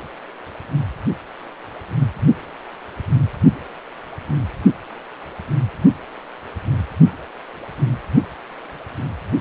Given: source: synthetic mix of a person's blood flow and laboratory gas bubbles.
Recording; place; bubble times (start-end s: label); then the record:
Doppler ultrasound of blood flow; precordium
no bubbles
From the record:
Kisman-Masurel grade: 000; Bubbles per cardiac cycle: 0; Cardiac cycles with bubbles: 0%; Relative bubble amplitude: no bubbles discernible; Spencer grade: 0 (complete lack of bubble signals)